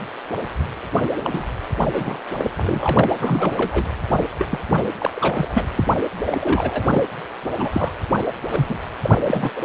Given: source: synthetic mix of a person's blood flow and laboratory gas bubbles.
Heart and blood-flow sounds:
Doppler ultrasound of blood flow; precordium
1.23-1.46 s: bubbles
1.93-2.20 s: bubbles
2.38-2.45 s: bubbles
2.56-3.08 s: bubbles
3.21-3.53 s: bubbles
3.57-3.85 s: bubbles
4.38-4.58 s: bubbles
4.98-5.10 s: bubbles
5.14-5.65 s: bubbles
5.76-5.84 s: bubbles
6.21-7.02 s: bubbles
7.58-7.92 s: bubbles
8.52-8.78 s: bubbles
9.03-9.10 s: bubbles
9.24-9.50 s: bubbles
9.56-9.65 s: bubbles
From the record:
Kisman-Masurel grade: 332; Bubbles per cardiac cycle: rolling drumbeat, 9 or more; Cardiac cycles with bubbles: 50 to 99%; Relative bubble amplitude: moderate (0.250 to 0.450); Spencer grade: 3 (all of the cardiac periods contain showers or single bubble signals, but not dominating or overriding the cardiac motion signals); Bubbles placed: anywhere in the cardiac cycle

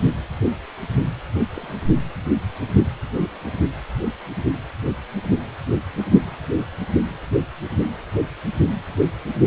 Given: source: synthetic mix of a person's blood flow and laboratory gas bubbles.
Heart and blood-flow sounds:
Doppler ultrasound of blood flow; precordium
1.54-1.76 s: bubbles
From the record:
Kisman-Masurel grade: 121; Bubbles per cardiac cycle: 1 to 2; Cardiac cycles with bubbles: 10 to 50%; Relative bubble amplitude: barely perceptible (0.100 to 0.250); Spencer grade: 2 (many but less than half of the cardiac periods contain bubble signals, singularly or in groups); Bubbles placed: only in the low amplitude regions of the cardiac cycle

